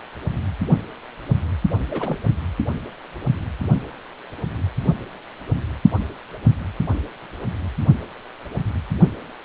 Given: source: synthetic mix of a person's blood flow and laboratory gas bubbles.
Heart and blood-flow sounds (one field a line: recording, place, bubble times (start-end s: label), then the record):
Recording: Doppler ultrasound of blood flow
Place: precordium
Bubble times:
1.90-2.18 s: bubbles
From the record:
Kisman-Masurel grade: 121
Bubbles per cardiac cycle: 1 to 2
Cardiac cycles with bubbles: 10 to 50%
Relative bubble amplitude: barely perceptible (0.100 to 0.250)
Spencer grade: 2 (many but less than half of the cardiac periods contain bubble signals, singularly or in groups)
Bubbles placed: only in the low amplitude regions of the cardiac cycle